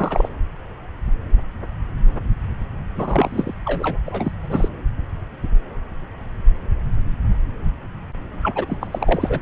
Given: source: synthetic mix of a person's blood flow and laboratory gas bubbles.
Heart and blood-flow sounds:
Doppler ultrasound of blood flow; subclavian vein
0.00-0.29 s: bubbles
2.96-3.54 s: bubbles
3.65-3.98 s: bubbles
4.07-4.32 s: bubbles
4.43-4.68 s: bubbles
8.43-9.40 s: bubbles
From the record:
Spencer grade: 2 (many but less than half of the cardiac periods contain bubble signals, singularly or in groups); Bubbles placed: anywhere in the cardiac cycle

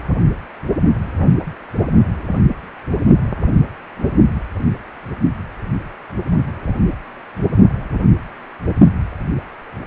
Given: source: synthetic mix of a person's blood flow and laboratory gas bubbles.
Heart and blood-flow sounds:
Doppler ultrasound of blood flow; precordium
7.52-7.62 s: bubbles
From the record:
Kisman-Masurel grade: 121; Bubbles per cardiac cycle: 1 to 2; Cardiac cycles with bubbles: 10 to 50%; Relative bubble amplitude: barely perceptible (0.100 to 0.250); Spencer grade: 2 (many but less than half of the cardiac periods contain bubble signals, singularly or in groups); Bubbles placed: anywhere in the cardiac cycle

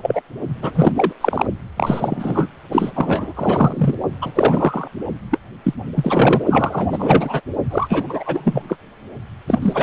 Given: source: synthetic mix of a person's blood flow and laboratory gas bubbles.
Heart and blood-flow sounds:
Doppler ultrasound of blood flow; precordium
0.00-0.22 s: bubbles
0.61-0.92 s: bubbles
0.95-1.12 s: bubbles
1.21-1.45 s: bubbles
1.76-2.48 s: bubbles
2.72-2.92 s: bubbles
2.95-3.33 s: bubbles
3.36-3.94 s: bubbles
4.21-4.88 s: bubbles
5.31-5.38 s: bubbles
5.63-5.74 s: bubbles
5.96-6.42 s: bubbles
6.48-7.40 s: bubbles
7.71-8.77 s: bubbles
9.47-9.59 s: bubbles
9.62-9.83 s: bubbles
From the record:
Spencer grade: 3 (all of the cardiac periods contain showers or single bubble signals, but not dominating or overriding the cardiac motion signals); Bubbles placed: only in the low amplitude regions of the cardiac cycle

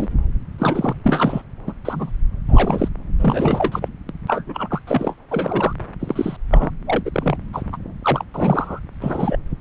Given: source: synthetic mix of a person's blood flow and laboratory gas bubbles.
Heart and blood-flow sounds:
Doppler ultrasound of blood flow; subclavian vein
0.00-0.07 s: bubbles
0.58-0.93 s: bubbles
1.03-1.41 s: bubbles
1.66-1.72 s: bubbles
1.84-2.12 s: bubbles
2.48-2.89 s: bubbles
3.19-3.88 s: bubbles
4.09-4.12 s: bubbles
4.28-4.43 s: bubbles
4.46-4.81 s: bubbles
4.87-5.16 s: bubbles
5.30-5.74 s: bubbles
5.99-6.37 s: bubbles
6.50-6.70 s: bubbles
6.87-7.03 s: bubbles
7.05-7.10 s: bubbles
7.13-7.37 s: bubbles
7.53-7.62 s: bubbles
7.72-7.77 s: bubbles
8.04-8.24 s: bubbles
8.34-8.79 s: bubbles
9.01-9.38 s: bubbles
From the record:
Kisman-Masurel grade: 242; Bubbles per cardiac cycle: several, 3 to 8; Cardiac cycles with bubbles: 100%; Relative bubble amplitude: moderate (0.250 to 0.450); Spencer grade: 3 (all of the cardiac periods contain showers or single bubble signals, but not dominating or overriding the cardiac motion signals); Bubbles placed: anywhere in the cardiac cycle

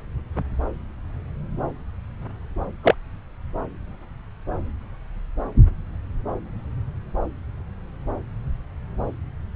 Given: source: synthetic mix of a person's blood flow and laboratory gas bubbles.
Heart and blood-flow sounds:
Doppler ultrasound of blood flow; subclavian vein
2.83-2.94 s: bubbles
From the record:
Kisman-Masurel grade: 113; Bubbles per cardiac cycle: 1 to 2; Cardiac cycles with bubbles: 1 to 10%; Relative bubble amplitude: loud (0.450 to 0.775); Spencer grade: 1 (occasional bubble signal discernible with the cardiac motion signal, with majority of cardiac periods free of bubbles); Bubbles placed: anywhere in the cardiac cycle

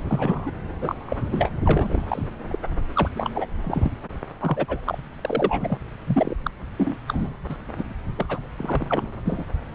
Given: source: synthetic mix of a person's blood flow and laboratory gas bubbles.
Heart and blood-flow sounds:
Doppler ultrasound of blood flow; subclavian vein
0.09-0.51 s: bubbles
0.80-0.95 s: bubbles
1.06-1.17 s: bubbles
1.31-1.51 s: bubbles
1.64-2.25 s: bubbles
2.48-2.58 s: bubbles
2.96-3.08 s: bubbles
3.15-3.29 s: bubbles
3.34-3.46 s: bubbles
3.63-3.92 s: bubbles
4.41-4.98 s: bubbles
5.25-5.78 s: bubbles
6.07-6.34 s: bubbles
6.43-6.50 s: bubbles
6.78-6.96 s: bubbles
7.08-7.34 s: bubbles
7.49-7.56 s: bubbles
7.78-7.83 s: bubbles
8.17-8.39 s: bubbles
8.56-8.86 s: bubbles
8.89-9.08 s: bubbles
9.25-9.45 s: bubbles
From the record:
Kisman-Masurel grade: 242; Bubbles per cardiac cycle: several, 3 to 8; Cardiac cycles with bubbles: 100%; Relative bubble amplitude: moderate (0.250 to 0.450); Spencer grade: 3 (all of the cardiac periods contain showers or single bubble signals, but not dominating or overriding the cardiac motion signals); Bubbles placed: anywhere in the cardiac cycle

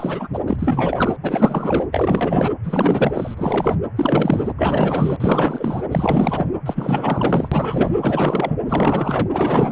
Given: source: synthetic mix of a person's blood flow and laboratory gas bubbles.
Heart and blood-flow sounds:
Doppler ultrasound of blood flow; precordium
0.00-0.28 s: bubbles
0.33-0.41 s: bubbles
0.46-0.56 s: bubbles
0.58-1.17 s: bubbles
1.23-1.86 s: bubbles
1.92-2.50 s: bubbles
2.63-3.75 s: bubbles
3.96-4.54 s: bubbles
4.57-5.17 s: bubbles
5.20-5.83 s: bubbles
5.91-6.47 s: bubbles
6.66-7.49 s: bubbles
7.51-7.91 s: bubbles
8.01-8.54 s: bubbles
8.68-9.28 s: bubbles
9.32-9.72 s: bubbles
From the record:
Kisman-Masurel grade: 444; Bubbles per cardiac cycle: continuous sound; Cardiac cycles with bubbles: 100%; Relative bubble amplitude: maximal (0.775 to 0.999); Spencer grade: 4 (maximum detectable bubble signal sounding continuously throughout systole and diastole of every cardiac period, and overriding the amplitude of the normal cardiac signals); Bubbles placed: anywhere in the cardiac cycle

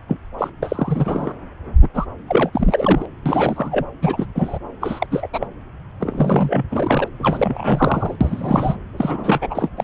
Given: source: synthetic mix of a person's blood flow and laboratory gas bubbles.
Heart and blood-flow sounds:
Doppler ultrasound of blood flow; subclavian vein
0.08-0.17 s: bubbles
0.38-0.50 s: bubbles
0.62-1.33 s: bubbles
1.81-1.88 s: bubbles
1.94-2.06 s: bubbles
2.29-2.50 s: bubbles
2.53-3.06 s: bubbles
3.25-3.86 s: bubbles
4.03-4.26 s: bubbles
4.35-4.58 s: bubbles
4.81-5.07 s: bubbles
5.11-5.28 s: bubbles
5.33-5.47 s: bubbles
6.00-6.65 s: bubbles
6.69-7.08 s: bubbles
7.19-8.15 s: bubbles
8.21-8.75 s: bubbles
8.96-9.70 s: bubbles
9.77-9.84 s: bubbles
From the record:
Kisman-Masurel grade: 342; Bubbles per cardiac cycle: rolling drumbeat, 9 or more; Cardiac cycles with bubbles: 100%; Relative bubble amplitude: moderate (0.250 to 0.450); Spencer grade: 3 (all of the cardiac periods contain showers or single bubble signals, but not dominating or overriding the cardiac motion signals); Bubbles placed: anywhere in the cardiac cycle

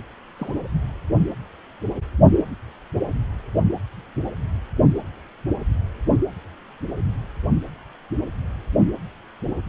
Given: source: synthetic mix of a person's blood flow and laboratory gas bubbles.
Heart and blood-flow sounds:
Doppler ultrasound of blood flow; precordium
0.38-0.54 s: bubbles
From the record:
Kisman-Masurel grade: 111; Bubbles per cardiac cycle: 1 to 2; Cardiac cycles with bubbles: 1 to 10%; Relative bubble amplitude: barely perceptible (0.100 to 0.250); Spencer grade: 1 (occasional bubble signal discernible with the cardiac motion signal, with majority of cardiac periods free of bubbles); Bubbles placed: only in the low amplitude regions of the cardiac cycle

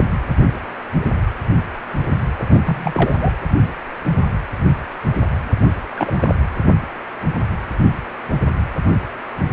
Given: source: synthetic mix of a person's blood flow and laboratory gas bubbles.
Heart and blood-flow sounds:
Doppler ultrasound of blood flow; precordium
2.39-2.58 s: bubbles
2.65-3.33 s: bubbles
5.96-6.35 s: bubbles
From the record:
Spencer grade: 2 (many but less than half of the cardiac periods contain bubble signals, singularly or in groups); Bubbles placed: anywhere in the cardiac cycle

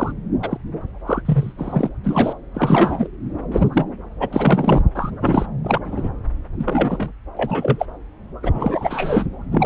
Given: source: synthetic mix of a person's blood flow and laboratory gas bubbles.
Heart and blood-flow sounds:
Doppler ultrasound of blood flow; subclavian vein
0.00-0.12 s: bubbles
0.43-0.58 s: bubbles
1.06-1.22 s: bubbles
1.25-1.53 s: bubbles
1.57-1.90 s: bubbles
2.04-2.33 s: bubbles
2.54-3.08 s: bubbles
3.52-3.67 s: bubbles
3.72-3.84 s: bubbles
4.20-4.82 s: bubbles
4.95-5.11 s: bubbles
5.20-5.46 s: bubbles
5.65-5.80 s: bubbles
5.84-6.09 s: bubbles
6.58-7.13 s: bubbles
7.37-7.86 s: bubbles
8.42-9.26 s: bubbles
9.51-9.66 s: bubbles
From the record:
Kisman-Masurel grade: 233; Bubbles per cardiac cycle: several, 3 to 8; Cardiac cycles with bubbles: 50 to 99%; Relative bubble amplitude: loud (0.450 to 0.775); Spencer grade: 3 (all of the cardiac periods contain showers or single bubble signals, but not dominating or overriding the cardiac motion signals); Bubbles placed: anywhere in the cardiac cycle

